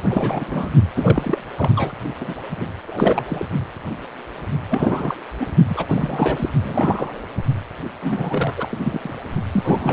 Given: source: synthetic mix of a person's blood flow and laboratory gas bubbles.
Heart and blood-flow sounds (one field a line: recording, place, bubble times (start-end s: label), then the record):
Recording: Doppler ultrasound of blood flow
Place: precordium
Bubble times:
0.09-0.70 s: bubbles
0.96-1.39 s: bubbles
1.56-1.70 s: bubbles
1.75-1.92 s: bubbles
2.20-2.33 s: bubbles
2.56-2.67 s: bubbles
2.87-3.46 s: bubbles
4.70-5.17 s: bubbles
5.40-5.46 s: bubbles
5.68-5.85 s: bubbles
5.88-6.49 s: bubbles
6.64-7.21 s: bubbles
8.02-9.14 s: bubbles
9.51-9.93 s: bubbles
From the record:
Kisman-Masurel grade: 332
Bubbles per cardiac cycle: rolling drumbeat, 9 or more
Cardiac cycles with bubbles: 50 to 99%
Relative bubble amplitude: moderate (0.250 to 0.450)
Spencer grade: 3 (all of the cardiac periods contain showers or single bubble signals, but not dominating or overriding the cardiac motion signals)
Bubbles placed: only in the low amplitude regions of the cardiac cycle